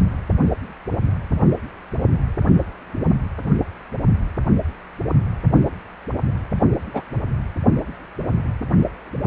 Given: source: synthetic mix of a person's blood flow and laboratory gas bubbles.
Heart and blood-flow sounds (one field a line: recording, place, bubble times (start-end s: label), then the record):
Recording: Doppler ultrasound of blood flow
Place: precordium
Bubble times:
6.93-7.02 s: bubbles
From the record:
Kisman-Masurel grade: 112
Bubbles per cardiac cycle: 1 to 2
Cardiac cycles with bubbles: 1 to 10%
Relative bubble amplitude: moderate (0.250 to 0.450)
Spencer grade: 1 (occasional bubble signal discernible with the cardiac motion signal, with majority of cardiac periods free of bubbles)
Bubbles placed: only in the low amplitude regions of the cardiac cycle